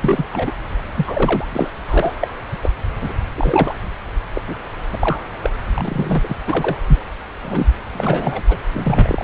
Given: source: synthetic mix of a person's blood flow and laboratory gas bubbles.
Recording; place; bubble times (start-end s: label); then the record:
Doppler ultrasound of blood flow; subclavian vein
0.04-0.26 s: bubbles
0.33-0.56 s: bubbles
0.94-1.48 s: bubbles
1.52-1.70 s: bubbles
1.88-2.15 s: bubbles
2.21-2.28 s: bubbles
2.62-2.74 s: bubbles
3.02-3.14 s: bubbles
3.38-3.75 s: bubbles
4.33-4.42 s: bubbles
4.46-4.55 s: bubbles
4.92-4.96 s: bubbles
5.00-5.28 s: bubbles
5.42-5.50 s: bubbles
5.72-6.36 s: bubbles
6.46-6.77 s: bubbles
6.88-7.00 s: bubbles
7.42-7.67 s: bubbles
7.92-8.42 s: bubbles
8.49-8.59 s: bubbles
8.74-9.24 s: bubbles
From the record:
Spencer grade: 3 (all of the cardiac periods contain showers or single bubble signals, but not dominating or overriding the cardiac motion signals); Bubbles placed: anywhere in the cardiac cycle